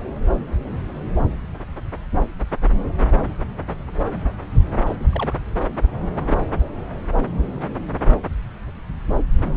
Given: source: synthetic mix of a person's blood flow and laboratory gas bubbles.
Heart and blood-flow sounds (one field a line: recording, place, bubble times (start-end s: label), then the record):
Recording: Doppler ultrasound of blood flow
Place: subclavian vein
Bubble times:
4.86-4.96 s: bubbles
5.00-5.04 s: bubbles
5.11-5.33 s: bubbles
From the record:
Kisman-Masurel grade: 211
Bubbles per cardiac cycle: several, 3 to 8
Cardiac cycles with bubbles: 1 to 10%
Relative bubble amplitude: barely perceptible (0.100 to 0.250)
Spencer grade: 1 (occasional bubble signal discernible with the cardiac motion signal, with majority of cardiac periods free of bubbles)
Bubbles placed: anywhere in the cardiac cycle